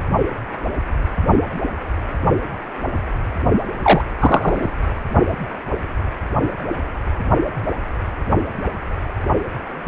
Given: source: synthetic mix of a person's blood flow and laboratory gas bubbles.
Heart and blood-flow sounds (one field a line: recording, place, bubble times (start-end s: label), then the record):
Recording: Doppler ultrasound of blood flow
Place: precordium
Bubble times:
3.83-4.02 s: bubbles
4.19-4.70 s: bubbles
From the record:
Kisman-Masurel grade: 113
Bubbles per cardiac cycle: 1 to 2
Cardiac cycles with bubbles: 1 to 10%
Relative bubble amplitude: loud (0.450 to 0.775)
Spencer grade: 1 (occasional bubble signal discernible with the cardiac motion signal, with majority of cardiac periods free of bubbles)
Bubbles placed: only in the low amplitude regions of the cardiac cycle